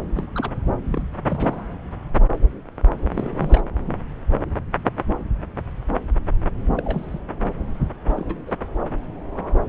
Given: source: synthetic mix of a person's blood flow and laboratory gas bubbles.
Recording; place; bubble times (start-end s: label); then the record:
Doppler ultrasound of blood flow; subclavian vein
0.14-0.27 s: bubbles
0.34-0.51 s: bubbles
0.87-1.01 s: bubbles
1.27-1.61 s: bubbles
3.13-3.62 s: bubbles
6.75-7.19 s: bubbles
8.16-8.35 s: bubbles
8.47-8.52 s: bubbles
From the record:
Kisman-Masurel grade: 221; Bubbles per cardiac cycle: several, 3 to 8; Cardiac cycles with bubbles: 10 to 50%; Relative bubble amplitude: barely perceptible (0.100 to 0.250); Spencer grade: 2 (many but less than half of the cardiac periods contain bubble signals, singularly or in groups); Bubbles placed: anywhere in the cardiac cycle